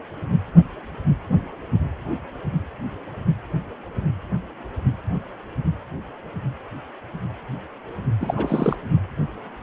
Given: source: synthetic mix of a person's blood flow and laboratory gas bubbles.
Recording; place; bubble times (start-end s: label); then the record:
Doppler ultrasound of blood flow; precordium
8.20-8.76 s: bubbles
From the record:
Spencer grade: 1 (occasional bubble signal discernible with the cardiac motion signal, with majority of cardiac periods free of bubbles); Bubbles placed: only in the low amplitude regions of the cardiac cycle